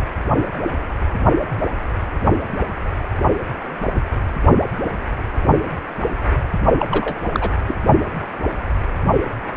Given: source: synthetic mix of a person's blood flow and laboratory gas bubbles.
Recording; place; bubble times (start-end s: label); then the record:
Doppler ultrasound of blood flow; precordium
6.79-6.86 s: bubbles
6.91-7.15 s: bubbles
7.32-7.50 s: bubbles
7.67-7.74 s: bubbles
From the record:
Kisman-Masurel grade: 213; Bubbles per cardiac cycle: several, 3 to 8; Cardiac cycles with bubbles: 1 to 10%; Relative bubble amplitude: loud (0.450 to 0.775); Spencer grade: 1 (occasional bubble signal discernible with the cardiac motion signal, with majority of cardiac periods free of bubbles); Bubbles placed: only in the low amplitude regions of the cardiac cycle